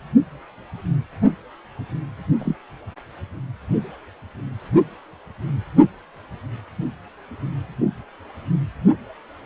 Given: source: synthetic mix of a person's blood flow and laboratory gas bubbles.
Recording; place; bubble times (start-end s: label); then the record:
Doppler ultrasound of blood flow; precordium
2.39-2.55 s: bubbles
From the record:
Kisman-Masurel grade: 112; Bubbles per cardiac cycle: 1 to 2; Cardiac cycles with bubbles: 1 to 10%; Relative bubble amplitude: moderate (0.250 to 0.450); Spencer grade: 1 (occasional bubble signal discernible with the cardiac motion signal, with majority of cardiac periods free of bubbles); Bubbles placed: anywhere in the cardiac cycle